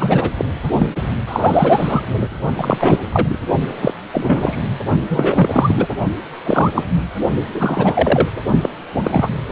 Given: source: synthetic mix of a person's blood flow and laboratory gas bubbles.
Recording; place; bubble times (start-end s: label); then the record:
Doppler ultrasound of blood flow; precordium
0.00-0.31 s: bubbles
0.38-0.45 s: bubbles
0.78-0.86 s: bubbles
1.27-2.01 s: bubbles
2.58-3.00 s: bubbles
3.12-3.37 s: bubbles
3.81-3.94 s: bubbles
4.13-4.58 s: bubbles
5.10-5.87 s: bubbles
6.44-6.71 s: bubbles
6.74-6.84 s: bubbles
7.54-8.29 s: bubbles
8.62-8.69 s: bubbles
8.95-9.29 s: bubbles
From the record:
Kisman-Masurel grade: 243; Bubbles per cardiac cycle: several, 3 to 8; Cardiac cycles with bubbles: 100%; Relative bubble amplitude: loud (0.450 to 0.775); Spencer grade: 3 (all of the cardiac periods contain showers or single bubble signals, but not dominating or overriding the cardiac motion signals); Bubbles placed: only in the low amplitude regions of the cardiac cycle